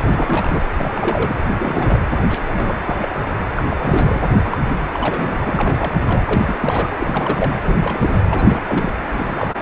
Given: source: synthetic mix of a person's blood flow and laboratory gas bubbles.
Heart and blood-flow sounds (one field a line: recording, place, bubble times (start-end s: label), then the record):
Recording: Doppler ultrasound of blood flow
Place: precordium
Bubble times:
0.02-0.63 s: bubbles
0.77-0.91 s: bubbles
0.94-1.36 s: bubbles
1.48-1.50 s: bubbles
1.59-2.00 s: bubbles
2.30-2.38 s: bubbles
2.56-2.75 s: bubbles
2.86-3.08 s: bubbles
3.56-3.62 s: bubbles
3.70-4.23 s: bubbles
4.43-4.62 s: bubbles
4.67-4.76 s: bubbles
4.93-5.42 s: bubbles
5.45-6.02 s: bubbles
6.06-6.24 s: bubbles
6.26-6.55 s: bubbles
6.62-6.89 s: bubbles
6.99-7.56 s: bubbles
7.63-8.22 s: bubbles
8.30-8.61 s: bubbles
8.68-8.93 s: bubbles
9.12-9.54 s: bubbles
9.58-9.61 s: bubbles
From the record:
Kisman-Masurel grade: 342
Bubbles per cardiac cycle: rolling drumbeat, 9 or more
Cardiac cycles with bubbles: 100%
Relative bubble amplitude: moderate (0.250 to 0.450)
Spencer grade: 3 (all of the cardiac periods contain showers or single bubble signals, but not dominating or overriding the cardiac motion signals)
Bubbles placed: anywhere in the cardiac cycle